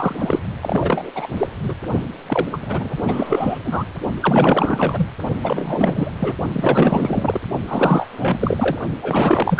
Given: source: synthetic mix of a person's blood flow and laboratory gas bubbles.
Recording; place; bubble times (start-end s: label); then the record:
Doppler ultrasound of blood flow; precordium
0.00-0.15 s: bubbles
0.19-0.42 s: bubbles
0.62-1.11 s: bubbles
1.15-1.28 s: bubbles
1.37-1.49 s: bubbles
1.62-1.75 s: bubbles
2.27-2.46 s: bubbles
2.52-3.59 s: bubbles
3.65-3.87 s: bubbles
4.20-5.08 s: bubbles
5.42-6.12 s: bubbles
6.18-6.36 s: bubbles
6.52-7.40 s: bubbles
7.67-8.78 s: bubbles
9.02-9.60 s: bubbles
From the record:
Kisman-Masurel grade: 444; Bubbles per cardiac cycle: continuous sound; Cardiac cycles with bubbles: 100%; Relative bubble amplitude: maximal (0.775 to 0.999); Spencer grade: 4 (maximum detectable bubble signal sounding continuously throughout systole and diastole of every cardiac period, and overriding the amplitude of the normal cardiac signals); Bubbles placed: only in the low amplitude regions of the cardiac cycle